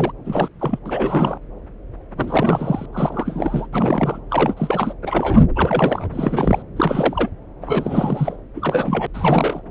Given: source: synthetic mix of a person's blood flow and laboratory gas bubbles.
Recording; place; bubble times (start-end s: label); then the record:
Doppler ultrasound of blood flow; subclavian vein
0.00-0.11 s: bubbles
0.24-0.48 s: bubbles
0.59-0.79 s: bubbles
0.85-1.38 s: bubbles
2.15-2.85 s: bubbles
2.92-3.67 s: bubbles
3.73-4.20 s: bubbles
4.29-4.94 s: bubbles
5.03-5.43 s: bubbles
5.56-6.10 s: bubbles
6.12-6.62 s: bubbles
6.76-7.30 s: bubbles
7.62-8.37 s: bubbles
8.55-9.06 s: bubbles
9.13-9.62 s: bubbles
From the record:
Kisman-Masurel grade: 332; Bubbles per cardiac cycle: rolling drumbeat, 9 or more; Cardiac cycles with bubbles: 50 to 99%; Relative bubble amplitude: moderate (0.250 to 0.450); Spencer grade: 3 (all of the cardiac periods contain showers or single bubble signals, but not dominating or overriding the cardiac motion signals); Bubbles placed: anywhere in the cardiac cycle